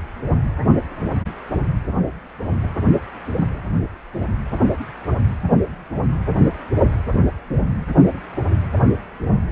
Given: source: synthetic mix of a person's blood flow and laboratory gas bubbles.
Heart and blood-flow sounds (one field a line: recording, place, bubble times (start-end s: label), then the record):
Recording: Doppler ultrasound of blood flow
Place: precordium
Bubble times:
no bubbles
From the record:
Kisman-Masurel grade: 000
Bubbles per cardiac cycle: 0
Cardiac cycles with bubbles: 0%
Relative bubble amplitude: no bubbles discernible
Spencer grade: 0 (complete lack of bubble signals)